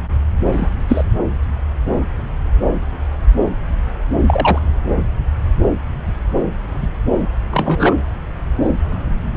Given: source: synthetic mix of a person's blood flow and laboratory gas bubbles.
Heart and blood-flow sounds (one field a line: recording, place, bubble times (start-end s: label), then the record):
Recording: Doppler ultrasound of blood flow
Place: subclavian vein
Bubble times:
0.52-0.69 s: bubbles
0.88-1.04 s: bubbles
4.28-4.60 s: bubbles
6.82-6.88 s: bubbles
7.50-7.95 s: bubbles
From the record:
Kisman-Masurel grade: 123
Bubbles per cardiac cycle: 1 to 2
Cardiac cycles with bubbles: 10 to 50%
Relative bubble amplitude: loud (0.450 to 0.775)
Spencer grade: 2 (many but less than half of the cardiac periods contain bubble signals, singularly or in groups)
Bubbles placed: anywhere in the cardiac cycle